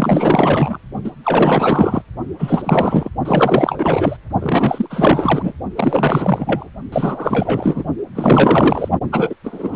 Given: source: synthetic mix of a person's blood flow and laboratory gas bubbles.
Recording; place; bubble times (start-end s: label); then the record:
Doppler ultrasound of blood flow; precordium
0.00-0.77 s: bubbles
1.03-1.11 s: bubbles
1.23-2.02 s: bubbles
2.39-3.09 s: bubbles
3.25-4.17 s: bubbles
4.39-5.53 s: bubbles
5.76-6.70 s: bubbles
6.92-7.83 s: bubbles
8.15-8.89 s: bubbles
9.12-9.35 s: bubbles
9.43-9.76 s: bubbles
From the record:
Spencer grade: 4 (maximum detectable bubble signal sounding continuously throughout systole and diastole of every cardiac period, and overriding the amplitude of the normal cardiac signals); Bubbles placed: only in the low amplitude regions of the cardiac cycle